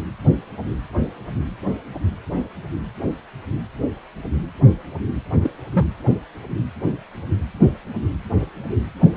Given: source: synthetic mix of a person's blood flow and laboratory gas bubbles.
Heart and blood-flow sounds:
Doppler ultrasound of blood flow; precordium
5.42-5.50 s: bubbles
5.72-5.86 s: bubbles
From the record:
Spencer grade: 2 (many but less than half of the cardiac periods contain bubble signals, singularly or in groups); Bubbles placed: only in the low amplitude regions of the cardiac cycle

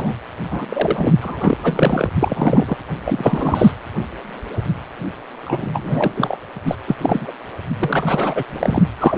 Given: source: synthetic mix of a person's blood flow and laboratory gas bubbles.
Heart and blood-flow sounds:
Doppler ultrasound of blood flow; precordium
0.00-0.15 s: bubbles
0.52-0.66 s: bubbles
0.69-1.13 s: bubbles
1.21-1.57 s: bubbles
1.63-2.10 s: bubbles
2.20-2.77 s: bubbles
3.04-3.71 s: bubbles
5.46-6.37 s: bubbles
6.65-6.75 s: bubbles
6.87-6.96 s: bubbles
6.99-7.32 s: bubbles
7.79-8.44 s: bubbles
8.49-8.83 s: bubbles
8.98-9.18 s: bubbles
From the record:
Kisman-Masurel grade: 333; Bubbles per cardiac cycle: rolling drumbeat, 9 or more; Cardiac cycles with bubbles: 50 to 99%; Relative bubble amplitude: loud (0.450 to 0.775); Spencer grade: 3 (all of the cardiac periods contain showers or single bubble signals, but not dominating or overriding the cardiac motion signals); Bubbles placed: anywhere in the cardiac cycle

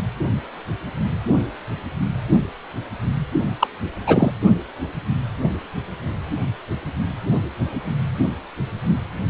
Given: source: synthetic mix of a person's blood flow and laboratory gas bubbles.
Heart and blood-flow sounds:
Doppler ultrasound of blood flow; precordium
3.59-3.67 s: bubbles
4.06-4.31 s: bubbles
From the record:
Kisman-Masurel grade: 213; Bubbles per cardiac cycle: several, 3 to 8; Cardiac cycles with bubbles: 1 to 10%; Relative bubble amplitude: loud (0.450 to 0.775); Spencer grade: 1 (occasional bubble signal discernible with the cardiac motion signal, with majority of cardiac periods free of bubbles); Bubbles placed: only in the low amplitude regions of the cardiac cycle

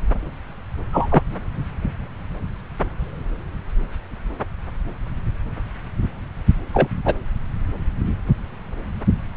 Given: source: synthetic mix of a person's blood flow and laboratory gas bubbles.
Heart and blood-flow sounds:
Doppler ultrasound of blood flow; subclavian vein
0.92-1.08 s: bubbles
1.10-1.23 s: bubbles
6.73-6.87 s: bubbles
7.05-7.14 s: bubbles
From the record:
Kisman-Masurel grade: 123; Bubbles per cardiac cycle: 1 to 2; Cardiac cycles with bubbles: 10 to 50%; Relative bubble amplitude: loud (0.450 to 0.775); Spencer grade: 2 (many but less than half of the cardiac periods contain bubble signals, singularly or in groups); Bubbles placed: anywhere in the cardiac cycle

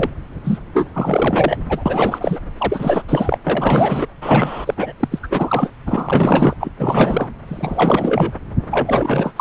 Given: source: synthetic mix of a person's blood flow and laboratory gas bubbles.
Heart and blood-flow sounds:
Doppler ultrasound of blood flow; subclavian vein
0.00-0.09 s: bubbles
0.44-0.58 s: bubbles
0.73-0.88 s: bubbles
0.94-1.59 s: bubbles
1.69-2.39 s: bubbles
2.59-3.03 s: bubbles
3.08-3.38 s: bubbles
3.46-4.07 s: bubbles
4.21-4.74 s: bubbles
4.77-4.92 s: bubbles
5.00-5.08 s: bubbles
5.11-5.19 s: bubbles
5.23-5.70 s: bubbles
5.86-6.54 s: bubbles
6.60-6.72 s: bubbles
6.78-7.35 s: bubbles
7.48-8.33 s: bubbles
8.71-9.33 s: bubbles
9.36-9.41 s: bubbles
From the record:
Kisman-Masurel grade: 444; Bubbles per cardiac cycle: continuous sound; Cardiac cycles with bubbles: 100%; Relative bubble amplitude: maximal (0.775 to 0.999); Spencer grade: 4 (maximum detectable bubble signal sounding continuously throughout systole and diastole of every cardiac period, and overriding the amplitude of the normal cardiac signals); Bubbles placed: anywhere in the cardiac cycle

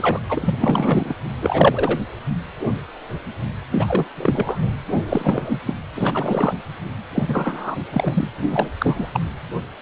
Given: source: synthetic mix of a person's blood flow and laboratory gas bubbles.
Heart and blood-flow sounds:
Doppler ultrasound of blood flow; precordium
0.00-0.20 s: bubbles
0.29-1.15 s: bubbles
1.41-1.99 s: bubbles
3.71-4.08 s: bubbles
4.17-4.73 s: bubbles
5.08-5.59 s: bubbles
5.66-5.74 s: bubbles
5.95-6.54 s: bubbles
7.15-7.77 s: bubbles
7.91-8.28 s: bubbles
8.38-8.69 s: bubbles
8.79-9.09 s: bubbles
9.12-9.20 s: bubbles
From the record:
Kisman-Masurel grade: 333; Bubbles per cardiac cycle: rolling drumbeat, 9 or more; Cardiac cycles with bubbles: 50 to 99%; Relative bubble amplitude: loud (0.450 to 0.775); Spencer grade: 3 (all of the cardiac periods contain showers or single bubble signals, but not dominating or overriding the cardiac motion signals); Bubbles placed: anywhere in the cardiac cycle

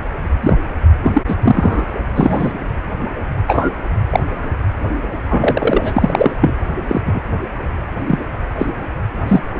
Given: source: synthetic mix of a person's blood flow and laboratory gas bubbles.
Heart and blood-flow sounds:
Doppler ultrasound of blood flow; precordium
0.41-0.57 s: bubbles
1.02-1.22 s: bubbles
1.28-1.35 s: bubbles
1.42-1.83 s: bubbles
2.15-2.52 s: bubbles
3.47-3.73 s: bubbles
4.10-4.20 s: bubbles
5.29-6.32 s: bubbles
6.41-6.54 s: bubbles
6.88-7.01 s: bubbles
7.05-7.21 s: bubbles
8.07-8.18 s: bubbles
8.58-8.67 s: bubbles
9.28-9.42 s: bubbles
9.55-9.60 s: bubbles
From the record:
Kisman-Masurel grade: 243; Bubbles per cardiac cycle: several, 3 to 8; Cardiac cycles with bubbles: 100%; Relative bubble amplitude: loud (0.450 to 0.775); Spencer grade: 3 (all of the cardiac periods contain showers or single bubble signals, but not dominating or overriding the cardiac motion signals); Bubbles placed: anywhere in the cardiac cycle

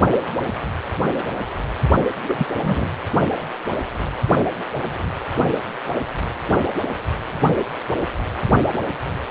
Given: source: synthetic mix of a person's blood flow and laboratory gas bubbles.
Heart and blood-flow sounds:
Doppler ultrasound of blood flow; precordium
2.28-2.46 s: bubbles
2.55-2.89 s: bubbles
From the record:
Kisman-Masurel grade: 222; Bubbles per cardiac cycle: several, 3 to 8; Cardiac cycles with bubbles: 10 to 50%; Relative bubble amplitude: moderate (0.250 to 0.450); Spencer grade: 2 (many but less than half of the cardiac periods contain bubble signals, singularly or in groups); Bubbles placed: anywhere in the cardiac cycle

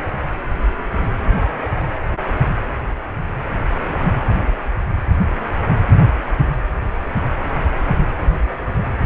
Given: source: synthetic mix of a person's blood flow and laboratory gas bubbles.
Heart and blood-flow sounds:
Doppler ultrasound of blood flow; precordium
no bubbles
From the record:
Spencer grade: 0 (complete lack of bubble signals)

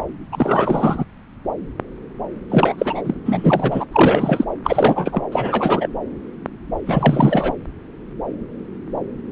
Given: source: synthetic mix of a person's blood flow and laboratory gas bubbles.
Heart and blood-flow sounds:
Doppler ultrasound of blood flow; subclavian vein
0.32-1.05 s: bubbles
2.50-2.75 s: bubbles
2.78-3.02 s: bubbles
3.04-3.15 s: bubbles
3.25-3.85 s: bubbles
3.92-4.45 s: bubbles
4.64-5.22 s: bubbles
5.31-5.88 s: bubbles
6.86-7.53 s: bubbles
From the record:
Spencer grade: 3 (all of the cardiac periods contain showers or single bubble signals, but not dominating or overriding the cardiac motion signals); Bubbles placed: anywhere in the cardiac cycle

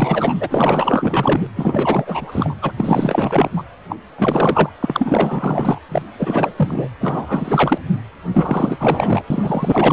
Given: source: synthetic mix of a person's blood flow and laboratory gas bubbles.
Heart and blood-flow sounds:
Doppler ultrasound of blood flow; precordium
0.00-1.47 s: bubbles
1.55-2.55 s: bubbles
2.61-2.71 s: bubbles
2.76-3.50 s: bubbles
3.56-3.63 s: bubbles
3.90-3.96 s: bubbles
4.18-4.70 s: bubbles
4.80-5.79 s: bubbles
5.91-6.03 s: bubbles
6.19-6.53 s: bubbles
6.56-6.89 s: bubbles
7.00-7.80 s: bubbles
8.34-9.24 s: bubbles
9.30-9.93 s: bubbles
From the record:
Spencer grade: 4 (maximum detectable bubble signal sounding continuously throughout systole and diastole of every cardiac period, and overriding the amplitude of the normal cardiac signals); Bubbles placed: anywhere in the cardiac cycle

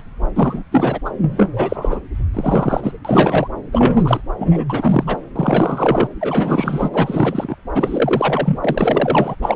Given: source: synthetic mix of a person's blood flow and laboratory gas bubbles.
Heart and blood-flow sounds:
Doppler ultrasound of blood flow; subclavian vein
0.00-0.02 s: bubbles
0.35-0.63 s: bubbles
0.71-0.99 s: bubbles
1.05-1.10 s: bubbles
1.21-2.00 s: bubbles
2.33-2.92 s: bubbles
3.04-3.48 s: bubbles
3.73-4.21 s: bubbles
4.39-4.64 s: bubbles
4.70-5.18 s: bubbles
5.36-6.08 s: bubbles
6.21-6.88 s: bubbles
6.93-7.55 s: bubbles
7.75-8.59 s: bubbles
8.63-9.36 s: bubbles
9.42-9.56 s: bubbles
From the record:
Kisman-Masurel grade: 343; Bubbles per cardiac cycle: rolling drumbeat, 9 or more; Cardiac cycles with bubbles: 100%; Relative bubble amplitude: loud (0.450 to 0.775); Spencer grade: 3 (all of the cardiac periods contain showers or single bubble signals, but not dominating or overriding the cardiac motion signals); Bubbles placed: anywhere in the cardiac cycle

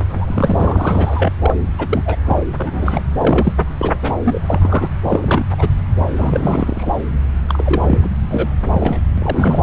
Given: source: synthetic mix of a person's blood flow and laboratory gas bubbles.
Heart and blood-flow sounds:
Doppler ultrasound of blood flow; subclavian vein
0.09-1.29 s: bubbles
1.40-1.54 s: bubbles
1.78-2.17 s: bubbles
2.25-2.42 s: bubbles
2.58-3.03 s: bubbles
3.19-3.54 s: bubbles
3.78-3.96 s: bubbles
4.02-4.13 s: bubbles
4.24-4.39 s: bubbles
4.46-4.88 s: bubbles
5.04-5.46 s: bubbles
5.50-5.69 s: bubbles
5.98-6.04 s: bubbles
6.16-6.92 s: bubbles
7.48-7.99 s: bubbles
8.01-8.09 s: bubbles
8.30-8.49 s: bubbles
8.72-9.02 s: bubbles
9.18-9.62 s: bubbles
From the record:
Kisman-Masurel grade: 342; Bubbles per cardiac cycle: rolling drumbeat, 9 or more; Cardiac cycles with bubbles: 100%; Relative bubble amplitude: moderate (0.250 to 0.450); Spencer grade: 3 (all of the cardiac periods contain showers or single bubble signals, but not dominating or overriding the cardiac motion signals); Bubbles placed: anywhere in the cardiac cycle

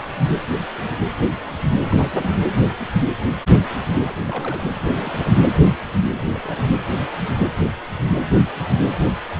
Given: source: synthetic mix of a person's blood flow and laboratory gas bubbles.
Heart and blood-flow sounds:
Doppler ultrasound of blood flow; precordium
1.90-2.36 s: bubbles
4.04-4.14 s: bubbles
4.24-4.69 s: bubbles
4.75-5.30 s: bubbles
6.14-6.21 s: bubbles
6.26-6.66 s: bubbles
From the record:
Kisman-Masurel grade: 221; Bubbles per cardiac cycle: several, 3 to 8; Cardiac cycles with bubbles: 10 to 50%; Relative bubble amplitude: barely perceptible (0.100 to 0.250); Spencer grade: 2 (many but less than half of the cardiac periods contain bubble signals, singularly or in groups); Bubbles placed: anywhere in the cardiac cycle

